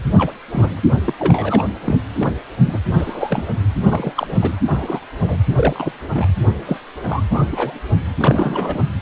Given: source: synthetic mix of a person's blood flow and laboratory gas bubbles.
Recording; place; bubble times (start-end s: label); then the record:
Doppler ultrasound of blood flow; precordium
0.18-0.32 s: bubbles
0.49-0.80 s: bubbles
1.04-1.14 s: bubbles
1.19-1.64 s: bubbles
1.85-1.96 s: bubbles
2.14-2.32 s: bubbles
2.65-2.79 s: bubbles
2.94-3.44 s: bubbles
3.81-4.13 s: bubbles
4.16-4.55 s: bubbles
4.68-5.01 s: bubbles
5.20-5.38 s: bubbles
5.56-5.93 s: bubbles
6.12-6.27 s: bubbles
6.66-6.78 s: bubbles
7.06-7.23 s: bubbles
7.29-7.44 s: bubbles
7.51-7.73 s: bubbles
8.16-8.79 s: bubbles
From the record:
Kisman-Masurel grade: 242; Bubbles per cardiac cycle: several, 3 to 8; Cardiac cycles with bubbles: 100%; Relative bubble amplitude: moderate (0.250 to 0.450); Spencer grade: 3 (all of the cardiac periods contain showers or single bubble signals, but not dominating or overriding the cardiac motion signals); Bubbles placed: anywhere in the cardiac cycle